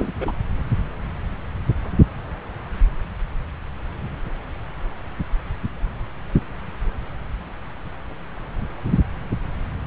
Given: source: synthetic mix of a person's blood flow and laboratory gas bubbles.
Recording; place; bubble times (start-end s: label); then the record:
Doppler ultrasound of blood flow; subclavian vein
0.00-0.11 s: bubbles
0.20-0.32 s: bubbles
From the record:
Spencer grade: 1 (occasional bubble signal discernible with the cardiac motion signal, with majority of cardiac periods free of bubbles); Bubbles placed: anywhere in the cardiac cycle